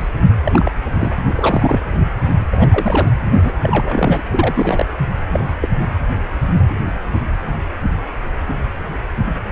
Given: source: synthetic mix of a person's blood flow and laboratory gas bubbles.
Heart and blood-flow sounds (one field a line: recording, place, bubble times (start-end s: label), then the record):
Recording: Doppler ultrasound of blood flow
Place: precordium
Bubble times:
0.00-0.08 s: bubbles
0.43-0.72 s: bubbles
1.00-1.16 s: bubbles
1.35-1.79 s: bubbles
2.51-3.11 s: bubbles
3.42-3.52 s: bubbles
3.61-4.23 s: bubbles
4.32-4.86 s: bubbles
5.28-5.53 s: bubbles
5.62-5.68 s: bubbles
From the record:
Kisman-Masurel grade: 222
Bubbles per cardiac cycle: several, 3 to 8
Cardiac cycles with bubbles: 10 to 50%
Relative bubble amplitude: moderate (0.250 to 0.450)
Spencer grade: 2 (many but less than half of the cardiac periods contain bubble signals, singularly or in groups)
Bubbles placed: anywhere in the cardiac cycle